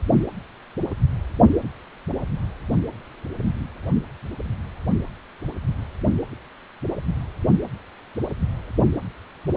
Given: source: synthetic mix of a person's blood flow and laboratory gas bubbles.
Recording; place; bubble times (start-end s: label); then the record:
Doppler ultrasound of blood flow; precordium
no bubbles
From the record:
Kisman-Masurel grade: 000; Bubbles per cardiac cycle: 0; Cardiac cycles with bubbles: 0%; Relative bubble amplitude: no bubbles discernible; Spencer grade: 0 (complete lack of bubble signals)